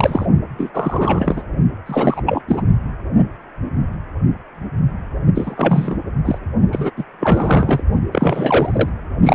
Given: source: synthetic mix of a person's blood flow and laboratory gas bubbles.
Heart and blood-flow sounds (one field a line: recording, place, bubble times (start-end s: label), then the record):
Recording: Doppler ultrasound of blood flow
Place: precordium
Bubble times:
0.00-0.26 s: bubbles
0.58-0.70 s: bubbles
0.74-1.42 s: bubbles
1.86-2.21 s: bubbles
2.25-2.42 s: bubbles
2.48-2.62 s: bubbles
5.34-5.96 s: bubbles
6.25-6.38 s: bubbles
6.72-6.91 s: bubbles
6.96-7.04 s: bubbles
7.20-7.83 s: bubbles
8.12-8.89 s: bubbles
9.23-9.35 s: bubbles
From the record:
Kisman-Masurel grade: 333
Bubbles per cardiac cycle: rolling drumbeat, 9 or more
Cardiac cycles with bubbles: 50 to 99%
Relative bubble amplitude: loud (0.450 to 0.775)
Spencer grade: 3 (all of the cardiac periods contain showers or single bubble signals, but not dominating or overriding the cardiac motion signals)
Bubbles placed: only in the low amplitude regions of the cardiac cycle